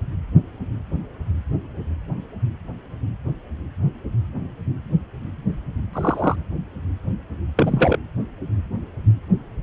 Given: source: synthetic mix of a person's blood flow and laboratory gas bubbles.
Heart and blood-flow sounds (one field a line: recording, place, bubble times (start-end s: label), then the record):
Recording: Doppler ultrasound of blood flow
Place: precordium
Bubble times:
5.93-6.36 s: bubbles
7.56-7.97 s: bubbles
From the record:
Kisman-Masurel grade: 113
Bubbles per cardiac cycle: 1 to 2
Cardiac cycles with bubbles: 1 to 10%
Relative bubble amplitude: loud (0.450 to 0.775)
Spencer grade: 1 (occasional bubble signal discernible with the cardiac motion signal, with majority of cardiac periods free of bubbles)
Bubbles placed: anywhere in the cardiac cycle